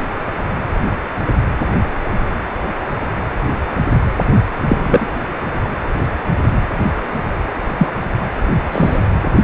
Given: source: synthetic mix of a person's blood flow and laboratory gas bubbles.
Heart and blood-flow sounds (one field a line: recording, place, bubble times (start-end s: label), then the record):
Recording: Doppler ultrasound of blood flow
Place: precordium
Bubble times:
4.68-5.07 s: bubbles
7.79-7.88 s: bubbles
8.71-8.98 s: bubbles
From the record:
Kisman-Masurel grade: 123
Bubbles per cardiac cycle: 1 to 2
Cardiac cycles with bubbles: 10 to 50%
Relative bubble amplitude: loud (0.450 to 0.775)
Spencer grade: 2 (many but less than half of the cardiac periods contain bubble signals, singularly or in groups)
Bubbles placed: anywhere in the cardiac cycle